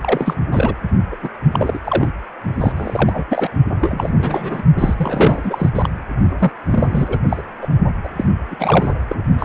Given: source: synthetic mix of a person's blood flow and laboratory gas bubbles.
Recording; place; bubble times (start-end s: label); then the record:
Doppler ultrasound of blood flow; precordium
0.01-0.34 s: bubbles
0.52-0.75 s: bubbles
1.11-1.17 s: bubbles
1.22-1.30 s: bubbles
1.44-1.80 s: bubbles
1.84-2.09 s: bubbles
2.56-2.72 s: bubbles
2.76-3.25 s: bubbles
3.29-3.49 s: bubbles
3.80-4.10 s: bubbles
4.18-4.62 s: bubbles
4.78-5.70 s: bubbles
5.75-5.89 s: bubbles
6.38-6.51 s: bubbles
6.70-7.18 s: bubbles
7.29-7.42 s: bubbles
7.62-7.68 s: bubbles
8.03-8.08 s: bubbles
8.16-8.24 s: bubbles
8.50-8.56 s: bubbles
8.59-8.95 s: bubbles
9.09-9.20 s: bubbles
9.38-9.45 s: bubbles
From the record:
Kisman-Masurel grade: 342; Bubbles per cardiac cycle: rolling drumbeat, 9 or more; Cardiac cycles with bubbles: 100%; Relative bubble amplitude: moderate (0.250 to 0.450); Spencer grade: 3 (all of the cardiac periods contain showers or single bubble signals, but not dominating or overriding the cardiac motion signals); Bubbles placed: only in the low amplitude regions of the cardiac cycle